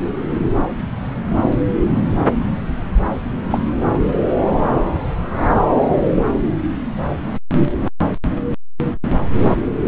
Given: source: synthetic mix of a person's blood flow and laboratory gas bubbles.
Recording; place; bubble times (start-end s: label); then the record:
Doppler ultrasound of blood flow; subclavian vein
3.50-3.58 s: bubbles
From the record:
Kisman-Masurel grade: 113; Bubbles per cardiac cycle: 1 to 2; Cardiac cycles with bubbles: 1 to 10%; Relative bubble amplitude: loud (0.450 to 0.775); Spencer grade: 1 (occasional bubble signal discernible with the cardiac motion signal, with majority of cardiac periods free of bubbles); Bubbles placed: anywhere in the cardiac cycle